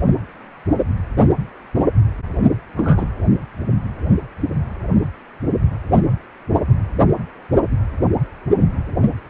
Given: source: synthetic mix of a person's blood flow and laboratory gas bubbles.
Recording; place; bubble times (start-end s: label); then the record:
Doppler ultrasound of blood flow; precordium
2.76-3.06 s: bubbles
From the record:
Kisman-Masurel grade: 112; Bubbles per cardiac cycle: 1 to 2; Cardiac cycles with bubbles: 1 to 10%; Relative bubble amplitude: moderate (0.250 to 0.450); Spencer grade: 1 (occasional bubble signal discernible with the cardiac motion signal, with majority of cardiac periods free of bubbles); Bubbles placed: only in the low amplitude regions of the cardiac cycle